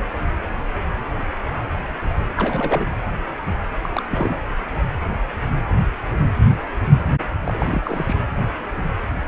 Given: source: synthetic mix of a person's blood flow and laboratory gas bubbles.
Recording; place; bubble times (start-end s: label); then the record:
Doppler ultrasound of blood flow; precordium
2.36-2.91 s: bubbles
3.82-4.03 s: bubbles
4.10-4.40 s: bubbles
7.45-8.16 s: bubbles
From the record:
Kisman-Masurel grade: 221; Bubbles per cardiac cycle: several, 3 to 8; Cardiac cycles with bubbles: 10 to 50%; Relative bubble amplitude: barely perceptible (0.100 to 0.250); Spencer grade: 2 (many but less than half of the cardiac periods contain bubble signals, singularly or in groups); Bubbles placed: anywhere in the cardiac cycle